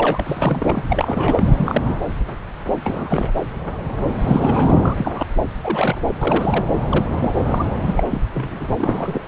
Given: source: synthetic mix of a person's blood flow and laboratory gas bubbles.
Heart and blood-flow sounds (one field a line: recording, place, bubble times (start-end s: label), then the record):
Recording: Doppler ultrasound of blood flow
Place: subclavian vein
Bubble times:
0.00-0.23 s: bubbles
0.26-0.84 s: bubbles
0.89-1.44 s: bubbles
1.56-1.81 s: bubbles
1.88-1.94 s: bubbles
2.83-3.31 s: bubbles
4.21-4.74 s: bubbles
4.81-5.26 s: bubbles
5.62-5.96 s: bubbles
6.18-6.65 s: bubbles
6.89-7.04 s: bubbles
7.12-7.34 s: bubbles
7.46-7.66 s: bubbles
7.86-8.03 s: bubbles
8.10-8.24 s: bubbles
8.34-8.66 s: bubbles
8.77-9.21 s: bubbles
From the record:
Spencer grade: 3 (all of the cardiac periods contain showers or single bubble signals, but not dominating or overriding the cardiac motion signals)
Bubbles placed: anywhere in the cardiac cycle